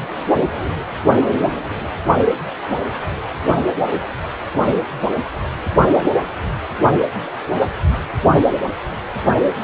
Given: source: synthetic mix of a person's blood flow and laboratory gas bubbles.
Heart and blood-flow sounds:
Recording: Doppler ultrasound of blood flow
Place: precordium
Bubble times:
4.69-4.78 s: bubbles
5.91-6.04 s: bubbles
From the record:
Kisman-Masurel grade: 121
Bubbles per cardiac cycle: 1 to 2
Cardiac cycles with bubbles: 10 to 50%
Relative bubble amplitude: barely perceptible (0.100 to 0.250)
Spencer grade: 2 (many but less than half of the cardiac periods contain bubble signals, singularly or in groups)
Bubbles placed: only in the low amplitude regions of the cardiac cycle

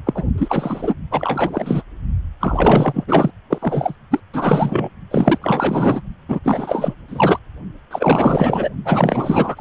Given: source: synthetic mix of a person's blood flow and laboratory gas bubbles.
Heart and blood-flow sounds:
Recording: Doppler ultrasound of blood flow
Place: precordium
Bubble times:
0.06-0.24 s: bubbles
0.38-0.95 s: bubbles
1.11-1.83 s: bubbles
2.40-3.31 s: bubbles
3.50-3.96 s: bubbles
4.10-4.20 s: bubbles
4.33-4.89 s: bubbles
5.10-5.38 s: bubbles
5.42-6.01 s: bubbles
6.29-6.40 s: bubbles
6.43-6.94 s: bubbles
7.07-7.39 s: bubbles
7.90-8.70 s: bubbles
8.85-9.61 s: bubbles
From the record:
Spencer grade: 4 (maximum detectable bubble signal sounding continuously throughout systole and diastole of every cardiac period, and overriding the amplitude of the normal cardiac signals)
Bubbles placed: only in the low amplitude regions of the cardiac cycle

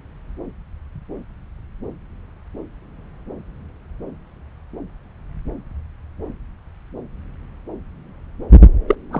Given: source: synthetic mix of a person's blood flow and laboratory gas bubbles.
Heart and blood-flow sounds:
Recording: Doppler ultrasound of blood flow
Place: subclavian vein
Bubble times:
8.88-8.95 s: bubbles
9.11-9.20 s: bubbles
From the record:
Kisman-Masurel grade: 213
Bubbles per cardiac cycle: several, 3 to 8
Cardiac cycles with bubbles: 1 to 10%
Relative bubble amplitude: loud (0.450 to 0.775)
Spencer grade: 1 (occasional bubble signal discernible with the cardiac motion signal, with majority of cardiac periods free of bubbles)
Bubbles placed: anywhere in the cardiac cycle

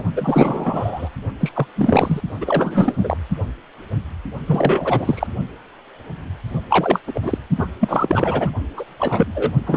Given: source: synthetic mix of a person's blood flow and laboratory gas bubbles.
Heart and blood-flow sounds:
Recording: Doppler ultrasound of blood flow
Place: precordium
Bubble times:
0.00-0.03 s: bubbles
0.16-1.09 s: bubbles
1.40-1.52 s: bubbles
1.55-1.67 s: bubbles
1.76-2.21 s: bubbles
2.41-3.17 s: bubbles
4.46-5.27 s: bubbles
6.70-7.00 s: bubbles
7.07-7.38 s: bubbles
7.57-7.68 s: bubbles
7.80-8.53 s: bubbles
8.77-8.85 s: bubbles
8.99-9.54 s: bubbles
9.67-9.77 s: bubbles
From the record:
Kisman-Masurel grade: 333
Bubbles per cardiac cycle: rolling drumbeat, 9 or more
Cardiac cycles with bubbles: 50 to 99%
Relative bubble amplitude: loud (0.450 to 0.775)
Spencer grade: 3 (all of the cardiac periods contain showers or single bubble signals, but not dominating or overriding the cardiac motion signals)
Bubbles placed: only in the low amplitude regions of the cardiac cycle

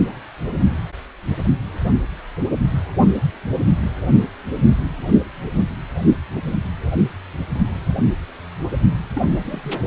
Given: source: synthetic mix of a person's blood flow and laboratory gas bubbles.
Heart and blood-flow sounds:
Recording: Doppler ultrasound of blood flow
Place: precordium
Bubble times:
9.14-9.21 s: bubbles
9.31-9.78 s: bubbles
From the record:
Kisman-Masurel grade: 211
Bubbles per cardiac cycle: several, 3 to 8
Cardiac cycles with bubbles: 1 to 10%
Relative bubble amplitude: barely perceptible (0.100 to 0.250)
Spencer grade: 1 (occasional bubble signal discernible with the cardiac motion signal, with majority of cardiac periods free of bubbles)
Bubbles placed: only in the low amplitude regions of the cardiac cycle

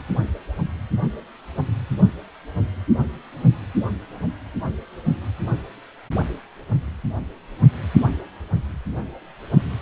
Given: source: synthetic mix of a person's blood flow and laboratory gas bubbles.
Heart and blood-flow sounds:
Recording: Doppler ultrasound of blood flow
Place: precordium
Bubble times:
no bubbles
From the record:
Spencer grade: 0 (complete lack of bubble signals)

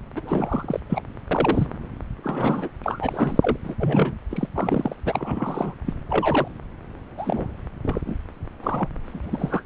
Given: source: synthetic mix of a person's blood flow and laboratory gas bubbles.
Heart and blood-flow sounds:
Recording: Doppler ultrasound of blood flow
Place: subclavian vein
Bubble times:
0.15-0.80 s: bubbles
0.89-1.01 s: bubbles
1.31-1.67 s: bubbles
2.17-2.68 s: bubbles
2.83-3.38 s: bubbles
3.42-3.56 s: bubbles
3.63-3.75 s: bubbles
3.79-4.14 s: bubbles
4.30-4.47 s: bubbles
4.54-4.96 s: bubbles
5.05-5.75 s: bubbles
5.85-5.93 s: bubbles
6.09-6.48 s: bubbles
7.17-7.47 s: bubbles
7.84-8.02 s: bubbles
8.06-8.17 s: bubbles
8.62-8.89 s: bubbles
9.03-9.63 s: bubbles
From the record:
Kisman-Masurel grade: 243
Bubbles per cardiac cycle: several, 3 to 8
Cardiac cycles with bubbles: 100%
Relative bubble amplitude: loud (0.450 to 0.775)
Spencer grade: 3 (all of the cardiac periods contain showers or single bubble signals, but not dominating or overriding the cardiac motion signals)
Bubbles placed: anywhere in the cardiac cycle

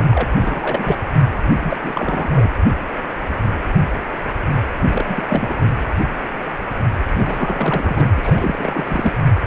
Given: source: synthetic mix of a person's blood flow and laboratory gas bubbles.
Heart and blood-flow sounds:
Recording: Doppler ultrasound of blood flow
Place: precordium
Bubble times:
0.00-0.05 s: bubbles
0.11-0.97 s: bubbles
1.58-1.77 s: bubbles
1.81-2.52 s: bubbles
4.85-5.76 s: bubbles
7.13-9.13 s: bubbles
From the record:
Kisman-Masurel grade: 332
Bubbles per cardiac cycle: rolling drumbeat, 9 or more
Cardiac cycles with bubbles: 50 to 99%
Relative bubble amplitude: moderate (0.250 to 0.450)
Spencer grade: 3 (all of the cardiac periods contain showers or single bubble signals, but not dominating or overriding the cardiac motion signals)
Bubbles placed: anywhere in the cardiac cycle

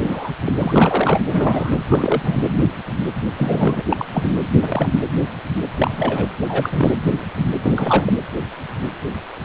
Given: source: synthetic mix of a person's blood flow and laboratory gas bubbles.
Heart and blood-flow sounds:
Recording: Doppler ultrasound of blood flow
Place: precordium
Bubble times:
0.00-0.33 s: bubbles
0.46-0.53 s: bubbles
0.60-1.20 s: bubbles
1.31-1.82 s: bubbles
1.89-2.42 s: bubbles
3.38-3.83 s: bubbles
3.88-4.06 s: bubbles
4.12-4.35 s: bubbles
4.62-4.89 s: bubbles
5.77-6.28 s: bubbles
6.41-6.95 s: bubbles
7.64-8.18 s: bubbles
From the record:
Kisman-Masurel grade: 232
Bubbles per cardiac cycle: several, 3 to 8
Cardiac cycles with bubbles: 50 to 99%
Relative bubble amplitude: moderate (0.250 to 0.450)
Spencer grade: 3 (all of the cardiac periods contain showers or single bubble signals, but not dominating or overriding the cardiac motion signals)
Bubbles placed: anywhere in the cardiac cycle

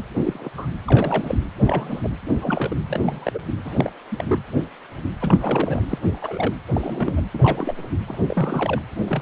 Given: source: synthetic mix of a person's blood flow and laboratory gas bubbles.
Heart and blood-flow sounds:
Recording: Doppler ultrasound of blood flow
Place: precordium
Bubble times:
0.23-0.49 s: bubbles
0.57-0.67 s: bubbles
0.87-1.39 s: bubbles
1.62-2.08 s: bubbles
2.41-2.75 s: bubbles
2.88-3.39 s: bubbles
3.65-3.92 s: bubbles
4.12-4.24 s: bubbles
4.28-4.40 s: bubbles
5.21-5.82 s: bubbles
5.88-5.99 s: bubbles
6.02-6.54 s: bubbles
6.73-7.21 s: bubbles
7.34-7.89 s: bubbles
8.07-8.18 s: bubbles
8.28-8.82 s: bubbles
9.07-9.22 s: bubbles
From the record:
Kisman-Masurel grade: 232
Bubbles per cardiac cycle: several, 3 to 8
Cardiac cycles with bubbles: 50 to 99%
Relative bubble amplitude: moderate (0.250 to 0.450)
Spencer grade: 3 (all of the cardiac periods contain showers or single bubble signals, but not dominating or overriding the cardiac motion signals)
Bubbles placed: anywhere in the cardiac cycle

